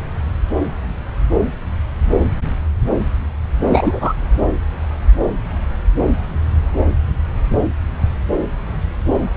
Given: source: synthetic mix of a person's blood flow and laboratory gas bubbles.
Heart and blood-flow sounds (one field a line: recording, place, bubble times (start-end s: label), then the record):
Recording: Doppler ultrasound of blood flow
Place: subclavian vein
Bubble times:
3.69-4.13 s: bubbles
From the record:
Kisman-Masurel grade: 213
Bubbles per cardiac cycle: several, 3 to 8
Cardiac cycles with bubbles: 1 to 10%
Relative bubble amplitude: loud (0.450 to 0.775)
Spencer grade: 1 (occasional bubble signal discernible with the cardiac motion signal, with majority of cardiac periods free of bubbles)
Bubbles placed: anywhere in the cardiac cycle